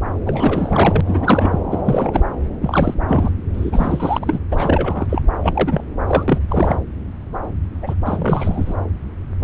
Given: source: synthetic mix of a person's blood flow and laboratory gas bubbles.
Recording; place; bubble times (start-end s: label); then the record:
Doppler ultrasound of blood flow; subclavian vein
0.26-1.01 s: bubbles
1.05-1.60 s: bubbles
1.70-1.81 s: bubbles
1.84-2.24 s: bubbles
2.61-2.94 s: bubbles
3.08-3.30 s: bubbles
3.54-4.39 s: bubbles
4.51-5.06 s: bubbles
5.09-5.22 s: bubbles
5.43-5.84 s: bubbles
6.08-6.23 s: bubbles
6.28-6.38 s: bubbles
6.42-6.80 s: bubbles
7.82-7.95 s: bubbles
8.05-8.74 s: bubbles
From the record:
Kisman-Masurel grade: 332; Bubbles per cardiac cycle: rolling drumbeat, 9 or more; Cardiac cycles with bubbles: 50 to 99%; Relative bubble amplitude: moderate (0.250 to 0.450); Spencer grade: 3 (all of the cardiac periods contain showers or single bubble signals, but not dominating or overriding the cardiac motion signals); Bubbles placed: anywhere in the cardiac cycle